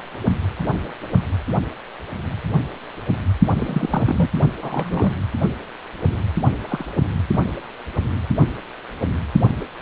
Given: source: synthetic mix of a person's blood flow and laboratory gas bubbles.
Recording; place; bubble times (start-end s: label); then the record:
Doppler ultrasound of blood flow; precordium
3.56-4.29 s: bubbles
4.62-5.11 s: bubbles
6.69-6.86 s: bubbles
From the record:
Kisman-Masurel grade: 122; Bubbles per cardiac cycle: 1 to 2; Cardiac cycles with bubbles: 10 to 50%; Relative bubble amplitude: moderate (0.250 to 0.450); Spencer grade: 2 (many but less than half of the cardiac periods contain bubble signals, singularly or in groups); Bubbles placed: only in the low amplitude regions of the cardiac cycle